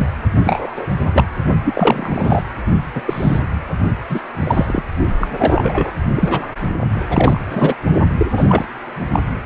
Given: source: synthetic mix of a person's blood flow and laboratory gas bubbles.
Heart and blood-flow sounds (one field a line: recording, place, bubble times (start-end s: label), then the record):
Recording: Doppler ultrasound of blood flow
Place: precordium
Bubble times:
0.00-0.07 s: bubbles
0.45-0.88 s: bubbles
1.13-1.26 s: bubbles
1.64-2.42 s: bubbles
2.94-3.02 s: bubbles
3.05-3.46 s: bubbles
4.08-4.22 s: bubbles
4.40-4.82 s: bubbles
5.21-5.27 s: bubbles
5.38-5.95 s: bubbles
6.15-6.46 s: bubbles
7.10-7.41 s: bubbles
7.50-7.75 s: bubbles
8.18-8.27 s: bubbles
8.37-8.44 s: bubbles
8.48-8.67 s: bubbles
9.12-9.20 s: bubbles
From the record:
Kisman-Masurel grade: 243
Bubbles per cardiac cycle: several, 3 to 8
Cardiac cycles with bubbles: 100%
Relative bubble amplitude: loud (0.450 to 0.775)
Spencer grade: 3 (all of the cardiac periods contain showers or single bubble signals, but not dominating or overriding the cardiac motion signals)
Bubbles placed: only in the low amplitude regions of the cardiac cycle